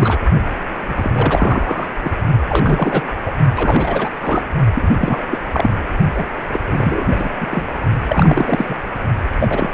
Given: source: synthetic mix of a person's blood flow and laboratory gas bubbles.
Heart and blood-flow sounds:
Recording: Doppler ultrasound of blood flow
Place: precordium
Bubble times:
0.00-0.18 s: bubbles
0.89-1.10 s: bubbles
1.14-1.87 s: bubbles
2.04-2.12 s: bubbles
2.49-3.02 s: bubbles
3.26-3.32 s: bubbles
3.54-4.09 s: bubbles
4.21-4.42 s: bubbles
4.73-5.23 s: bubbles
5.30-5.38 s: bubbles
5.53-5.71 s: bubbles
6.15-6.25 s: bubbles
6.53-6.59 s: bubbles
6.67-7.29 s: bubbles
7.40-7.47 s: bubbles
7.50-7.66 s: bubbles
8.07-8.65 s: bubbles
8.69-8.76 s: bubbles
9.39-9.70 s: bubbles
From the record:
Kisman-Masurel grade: 343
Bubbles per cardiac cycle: rolling drumbeat, 9 or more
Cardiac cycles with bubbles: 100%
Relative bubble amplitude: loud (0.450 to 0.775)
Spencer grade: 3 (all of the cardiac periods contain showers or single bubble signals, but not dominating or overriding the cardiac motion signals)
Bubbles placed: only in the low amplitude regions of the cardiac cycle

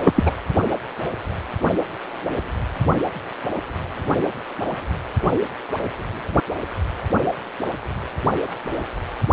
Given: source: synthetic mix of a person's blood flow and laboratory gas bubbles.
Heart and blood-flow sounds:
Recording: Doppler ultrasound of blood flow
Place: precordium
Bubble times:
0.03-0.23 s: bubbles
0.26-0.32 s: bubbles
From the record:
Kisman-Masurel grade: 213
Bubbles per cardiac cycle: several, 3 to 8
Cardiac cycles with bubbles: 1 to 10%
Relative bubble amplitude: loud (0.450 to 0.775)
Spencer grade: 1 (occasional bubble signal discernible with the cardiac motion signal, with majority of cardiac periods free of bubbles)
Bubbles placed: anywhere in the cardiac cycle

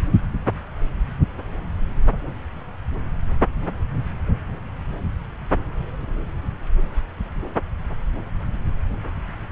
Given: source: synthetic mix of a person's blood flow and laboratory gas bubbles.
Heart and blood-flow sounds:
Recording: Doppler ultrasound of blood flow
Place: subclavian vein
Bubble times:
no bubbles
From the record:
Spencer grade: 0 (complete lack of bubble signals)

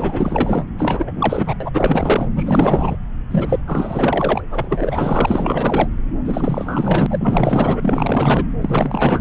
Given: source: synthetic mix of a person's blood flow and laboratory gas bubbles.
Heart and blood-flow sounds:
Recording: Doppler ultrasound of blood flow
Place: subclavian vein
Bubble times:
0.00-0.65 s: bubbles
0.78-1.55 s: bubbles
1.60-1.70 s: bubbles
1.73-2.28 s: bubbles
2.35-2.96 s: bubbles
3.31-3.60 s: bubbles
3.67-4.42 s: bubbles
4.48-5.88 s: bubbles
6.25-7.07 s: bubbles
7.09-8.44 s: bubbles
8.60-9.21 s: bubbles
From the record:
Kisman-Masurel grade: 444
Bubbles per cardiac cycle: continuous sound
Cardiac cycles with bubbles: 100%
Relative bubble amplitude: maximal (0.775 to 0.999)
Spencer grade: 4 (maximum detectable bubble signal sounding continuously throughout systole and diastole of every cardiac period, and overriding the amplitude of the normal cardiac signals)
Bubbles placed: anywhere in the cardiac cycle

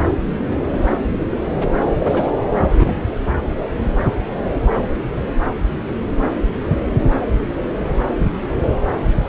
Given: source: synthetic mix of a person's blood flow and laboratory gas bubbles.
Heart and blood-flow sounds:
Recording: Doppler ultrasound of blood flow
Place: subclavian vein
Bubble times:
1.98-2.40 s: bubbles
2.73-2.92 s: bubbles
From the record:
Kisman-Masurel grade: 212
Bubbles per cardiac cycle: several, 3 to 8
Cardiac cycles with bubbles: 1 to 10%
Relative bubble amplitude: moderate (0.250 to 0.450)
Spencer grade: 1 (occasional bubble signal discernible with the cardiac motion signal, with majority of cardiac periods free of bubbles)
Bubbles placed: anywhere in the cardiac cycle

